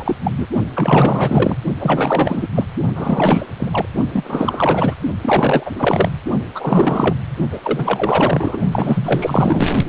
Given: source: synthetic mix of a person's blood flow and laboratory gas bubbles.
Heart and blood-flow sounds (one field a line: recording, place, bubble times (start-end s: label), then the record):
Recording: Doppler ultrasound of blood flow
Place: precordium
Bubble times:
0.00-0.16 s: bubbles
0.23-0.31 s: bubbles
0.38-0.47 s: bubbles
0.75-1.57 s: bubbles
1.78-2.48 s: bubbles
2.54-2.66 s: bubbles
2.95-3.46 s: bubbles
3.60-3.86 s: bubbles
4.13-4.95 s: bubbles
5.21-6.11 s: bubbles
6.54-7.15 s: bubbles
7.52-7.60 s: bubbles
7.62-8.58 s: bubbles
8.71-9.70 s: bubbles
9.85-9.88 s: bubbles
From the record:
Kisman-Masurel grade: 444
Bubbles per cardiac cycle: continuous sound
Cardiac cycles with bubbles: 100%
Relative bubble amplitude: maximal (0.775 to 0.999)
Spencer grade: 4 (maximum detectable bubble signal sounding continuously throughout systole and diastole of every cardiac period, and overriding the amplitude of the normal cardiac signals)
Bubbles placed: only in the low amplitude regions of the cardiac cycle